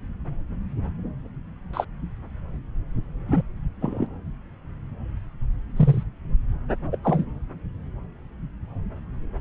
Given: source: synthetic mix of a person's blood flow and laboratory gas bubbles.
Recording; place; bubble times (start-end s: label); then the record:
Doppler ultrasound of blood flow; subclavian vein
1.73-1.85 s: bubbles
3.28-3.41 s: bubbles
3.81-4.06 s: bubbles
5.76-6.04 s: bubbles
6.92-6.99 s: bubbles
7.03-7.25 s: bubbles
From the record:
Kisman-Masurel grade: 122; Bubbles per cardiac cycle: 1 to 2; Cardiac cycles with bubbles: 10 to 50%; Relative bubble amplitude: moderate (0.250 to 0.450); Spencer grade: 2 (many but less than half of the cardiac periods contain bubble signals, singularly or in groups); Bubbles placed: anywhere in the cardiac cycle